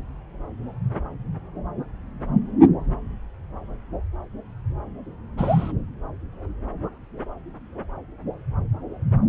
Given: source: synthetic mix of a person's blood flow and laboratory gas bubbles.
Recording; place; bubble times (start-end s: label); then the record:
Doppler ultrasound of blood flow; subclavian vein
5.38-5.72 s: bubbles
From the record:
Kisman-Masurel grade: 112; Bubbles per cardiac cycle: 1 to 2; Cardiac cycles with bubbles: 1 to 10%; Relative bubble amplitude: moderate (0.250 to 0.450); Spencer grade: 1 (occasional bubble signal discernible with the cardiac motion signal, with majority of cardiac periods free of bubbles); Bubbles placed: anywhere in the cardiac cycle